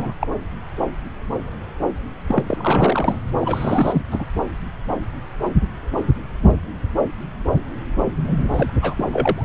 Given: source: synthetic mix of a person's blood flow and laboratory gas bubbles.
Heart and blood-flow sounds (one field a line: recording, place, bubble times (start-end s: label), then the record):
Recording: Doppler ultrasound of blood flow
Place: subclavian vein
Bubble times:
0.00-0.14 s: bubbles
0.20-0.27 s: bubbles
2.28-2.44 s: bubbles
2.48-3.19 s: bubbles
3.38-4.02 s: bubbles
4.10-4.25 s: bubbles
8.24-8.71 s: bubbles
8.81-9.04 s: bubbles
9.12-9.45 s: bubbles
From the record:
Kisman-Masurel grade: 332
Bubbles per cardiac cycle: rolling drumbeat, 9 or more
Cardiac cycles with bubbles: 50 to 99%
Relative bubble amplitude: moderate (0.250 to 0.450)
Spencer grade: 3 (all of the cardiac periods contain showers or single bubble signals, but not dominating or overriding the cardiac motion signals)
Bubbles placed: anywhere in the cardiac cycle